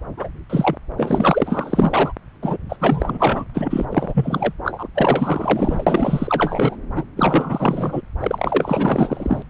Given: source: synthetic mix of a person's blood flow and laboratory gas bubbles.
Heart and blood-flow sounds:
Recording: Doppler ultrasound of blood flow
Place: subclavian vein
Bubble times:
0.16-0.29 s: bubbles
0.49-0.77 s: bubbles
0.97-2.12 s: bubbles
2.42-2.57 s: bubbles
2.69-2.76 s: bubbles
2.79-3.44 s: bubbles
3.54-3.85 s: bubbles
3.89-4.54 s: bubbles
4.63-4.88 s: bubbles
4.95-6.76 s: bubbles
6.95-7.04 s: bubbles
7.17-8.01 s: bubbles
8.20-9.43 s: bubbles
From the record:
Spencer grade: 4 (maximum detectable bubble signal sounding continuously throughout systole and diastole of every cardiac period, and overriding the amplitude of the normal cardiac signals)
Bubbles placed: anywhere in the cardiac cycle

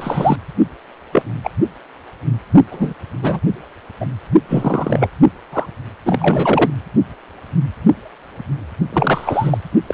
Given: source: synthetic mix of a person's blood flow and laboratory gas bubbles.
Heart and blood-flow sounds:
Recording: Doppler ultrasound of blood flow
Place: precordium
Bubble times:
0.00-0.38 s: bubbles
1.12-1.22 s: bubbles
1.44-1.50 s: bubbles
2.71-2.94 s: bubbles
3.22-3.40 s: bubbles
4.00-4.06 s: bubbles
4.49-5.10 s: bubbles
5.52-5.66 s: bubbles
6.06-6.71 s: bubbles
8.92-9.58 s: bubbles
9.87-9.94 s: bubbles
From the record:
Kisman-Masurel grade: 233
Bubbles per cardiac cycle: several, 3 to 8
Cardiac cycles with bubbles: 50 to 99%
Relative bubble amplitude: loud (0.450 to 0.775)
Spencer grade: 3 (all of the cardiac periods contain showers or single bubble signals, but not dominating or overriding the cardiac motion signals)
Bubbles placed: only in the low amplitude regions of the cardiac cycle

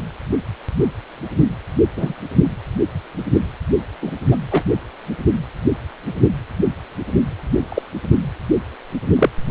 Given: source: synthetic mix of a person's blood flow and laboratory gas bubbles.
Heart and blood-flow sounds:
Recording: Doppler ultrasound of blood flow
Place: precordium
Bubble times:
1.96-2.15 s: bubbles
4.02-4.11 s: bubbles
4.31-4.37 s: bubbles
4.51-4.64 s: bubbles
7.69-7.82 s: bubbles
9.15-9.29 s: bubbles
From the record:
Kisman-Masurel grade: 123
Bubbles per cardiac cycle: 1 to 2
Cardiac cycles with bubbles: 10 to 50%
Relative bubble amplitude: loud (0.450 to 0.775)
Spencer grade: 2 (many but less than half of the cardiac periods contain bubble signals, singularly or in groups)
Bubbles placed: anywhere in the cardiac cycle

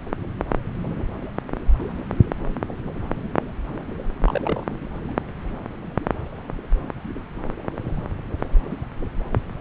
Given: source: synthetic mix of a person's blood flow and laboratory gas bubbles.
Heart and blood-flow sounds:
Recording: Doppler ultrasound of blood flow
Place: subclavian vein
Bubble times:
4.25-4.63 s: bubbles
From the record:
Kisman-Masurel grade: 111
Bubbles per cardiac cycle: 1 to 2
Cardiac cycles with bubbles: 1 to 10%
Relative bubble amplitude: barely perceptible (0.100 to 0.250)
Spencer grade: 1 (occasional bubble signal discernible with the cardiac motion signal, with majority of cardiac periods free of bubbles)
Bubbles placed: anywhere in the cardiac cycle

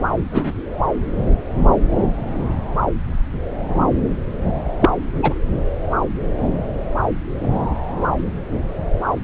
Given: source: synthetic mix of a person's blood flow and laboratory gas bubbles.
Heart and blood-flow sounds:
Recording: Doppler ultrasound of blood flow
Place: subclavian vein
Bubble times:
0.32-0.52 s: bubbles
4.80-4.90 s: bubbles
5.22-5.34 s: bubbles
From the record:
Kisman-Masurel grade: 123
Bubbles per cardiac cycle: 1 to 2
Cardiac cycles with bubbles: 10 to 50%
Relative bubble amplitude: loud (0.450 to 0.775)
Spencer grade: 2 (many but less than half of the cardiac periods contain bubble signals, singularly or in groups)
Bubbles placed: anywhere in the cardiac cycle

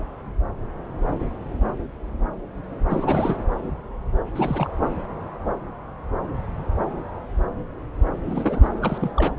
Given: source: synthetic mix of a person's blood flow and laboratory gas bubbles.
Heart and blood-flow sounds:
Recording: Doppler ultrasound of blood flow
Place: subclavian vein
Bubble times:
2.90-3.37 s: bubbles
4.35-4.71 s: bubbles
8.25-8.70 s: bubbles
8.81-9.11 s: bubbles
9.17-9.38 s: bubbles
From the record:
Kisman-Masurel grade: 222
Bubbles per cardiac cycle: several, 3 to 8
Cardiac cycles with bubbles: 10 to 50%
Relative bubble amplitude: moderate (0.250 to 0.450)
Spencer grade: 2 (many but less than half of the cardiac periods contain bubble signals, singularly or in groups)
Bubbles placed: anywhere in the cardiac cycle

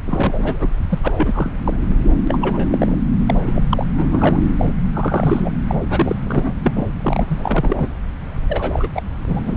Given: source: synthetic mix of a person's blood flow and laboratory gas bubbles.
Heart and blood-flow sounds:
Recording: Doppler ultrasound of blood flow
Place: subclavian vein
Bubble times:
0.06-0.68 s: bubbles
0.89-0.99 s: bubbles
1.04-1.12 s: bubbles
1.18-1.51 s: bubbles
1.64-1.78 s: bubbles
1.88-1.96 s: bubbles
2.27-2.67 s: bubbles
2.71-2.98 s: bubbles
3.25-3.36 s: bubbles
3.44-3.66 s: bubbles
3.69-3.86 s: bubbles
3.96-4.42 s: bubbles
4.58-4.75 s: bubbles
4.83-4.89 s: bubbles
4.94-5.51 s: bubbles
5.67-5.75 s: bubbles
5.90-6.16 s: bubbles
6.27-6.54 s: bubbles
6.64-6.73 s: bubbles
6.76-6.88 s: bubbles
7.03-7.91 s: bubbles
8.49-8.88 s: bubbles
8.94-9.02 s: bubbles
9.27-9.56 s: bubbles
From the record:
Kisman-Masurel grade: 332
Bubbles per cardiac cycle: rolling drumbeat, 9 or more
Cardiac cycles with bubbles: 50 to 99%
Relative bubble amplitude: moderate (0.250 to 0.450)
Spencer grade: 3 (all of the cardiac periods contain showers or single bubble signals, but not dominating or overriding the cardiac motion signals)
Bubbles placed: anywhere in the cardiac cycle

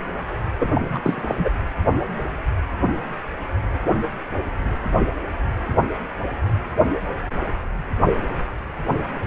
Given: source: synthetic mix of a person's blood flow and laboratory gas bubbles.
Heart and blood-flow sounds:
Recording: Doppler ultrasound of blood flow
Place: precordium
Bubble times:
0.60-1.00 s: bubbles
1.03-1.35 s: bubbles
1.38-1.50 s: bubbles
From the record:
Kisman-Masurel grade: 213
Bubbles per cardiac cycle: several, 3 to 8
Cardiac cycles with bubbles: 1 to 10%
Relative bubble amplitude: loud (0.450 to 0.775)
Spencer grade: 1 (occasional bubble signal discernible with the cardiac motion signal, with majority of cardiac periods free of bubbles)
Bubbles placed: anywhere in the cardiac cycle

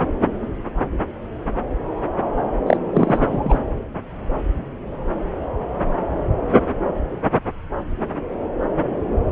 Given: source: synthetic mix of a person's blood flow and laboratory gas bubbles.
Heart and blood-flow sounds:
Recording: Doppler ultrasound of blood flow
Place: subclavian vein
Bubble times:
2.67-2.77 s: bubbles
2.93-3.59 s: bubbles
From the record:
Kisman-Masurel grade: 213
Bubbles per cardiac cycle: several, 3 to 8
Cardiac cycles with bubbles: 1 to 10%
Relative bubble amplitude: loud (0.450 to 0.775)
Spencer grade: 1 (occasional bubble signal discernible with the cardiac motion signal, with majority of cardiac periods free of bubbles)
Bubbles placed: anywhere in the cardiac cycle

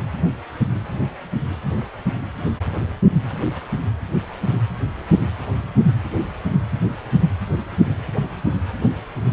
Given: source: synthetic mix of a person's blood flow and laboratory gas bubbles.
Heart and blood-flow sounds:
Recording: Doppler ultrasound of blood flow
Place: precordium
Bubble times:
no bubbles
From the record:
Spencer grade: 0 (complete lack of bubble signals)

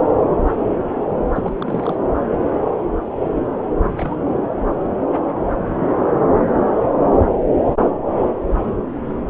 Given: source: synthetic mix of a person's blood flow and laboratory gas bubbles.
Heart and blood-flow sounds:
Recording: Doppler ultrasound of blood flow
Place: subclavian vein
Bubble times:
1.31-1.53 s: bubbles
1.58-2.01 s: bubbles
3.96-4.16 s: bubbles
From the record:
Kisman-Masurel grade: 221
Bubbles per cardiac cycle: several, 3 to 8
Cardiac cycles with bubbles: 10 to 50%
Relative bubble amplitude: barely perceptible (0.100 to 0.250)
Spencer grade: 2 (many but less than half of the cardiac periods contain bubble signals, singularly or in groups)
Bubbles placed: anywhere in the cardiac cycle

